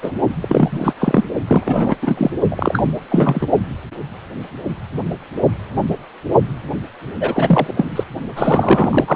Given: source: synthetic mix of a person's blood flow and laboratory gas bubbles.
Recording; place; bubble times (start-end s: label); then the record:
Doppler ultrasound of blood flow; precordium
0.02-0.12 s: bubbles
0.42-0.93 s: bubbles
0.99-1.24 s: bubbles
1.47-1.96 s: bubbles
2.02-2.31 s: bubbles
2.51-2.83 s: bubbles
3.10-3.47 s: bubbles
7.20-8.04 s: bubbles
8.36-9.16 s: bubbles
From the record:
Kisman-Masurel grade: 333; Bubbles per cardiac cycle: rolling drumbeat, 9 or more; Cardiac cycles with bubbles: 50 to 99%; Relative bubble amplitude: loud (0.450 to 0.775); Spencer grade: 3 (all of the cardiac periods contain showers or single bubble signals, but not dominating or overriding the cardiac motion signals); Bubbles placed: only in the low amplitude regions of the cardiac cycle